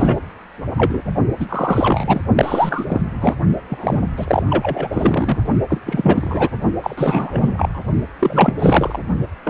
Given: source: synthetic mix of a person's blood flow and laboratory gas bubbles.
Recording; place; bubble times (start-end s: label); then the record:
Doppler ultrasound of blood flow; precordium
0.00-0.20 s: bubbles
0.74-1.03 s: bubbles
1.40-1.46 s: bubbles
1.49-2.21 s: bubbles
2.36-3.01 s: bubbles
3.21-3.34 s: bubbles
3.69-4.07 s: bubbles
4.17-4.43 s: bubbles
4.50-5.38 s: bubbles
5.69-5.78 s: bubbles
5.86-6.50 s: bubbles
6.83-7.82 s: bubbles
8.19-8.53 s: bubbles
8.58-8.99 s: bubbles
9.44-9.50 s: bubbles
From the record:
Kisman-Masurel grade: 343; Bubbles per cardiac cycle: rolling drumbeat, 9 or more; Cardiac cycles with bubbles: 100%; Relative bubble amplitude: loud (0.450 to 0.775); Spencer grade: 3 (all of the cardiac periods contain showers or single bubble signals, but not dominating or overriding the cardiac motion signals); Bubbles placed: only in the low amplitude regions of the cardiac cycle